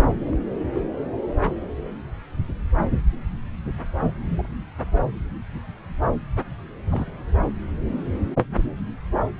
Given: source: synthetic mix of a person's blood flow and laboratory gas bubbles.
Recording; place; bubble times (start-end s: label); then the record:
Doppler ultrasound of blood flow; subclavian vein
0.00-0.35 s: bubbles
0.74-0.81 s: bubbles
4.28-4.57 s: bubbles
6.92-7.11 s: bubbles
From the record:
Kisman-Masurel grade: 121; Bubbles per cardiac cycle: 1 to 2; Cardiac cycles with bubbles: 10 to 50%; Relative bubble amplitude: barely perceptible (0.100 to 0.250); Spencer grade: 2 (many but less than half of the cardiac periods contain bubble signals, singularly or in groups); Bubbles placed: anywhere in the cardiac cycle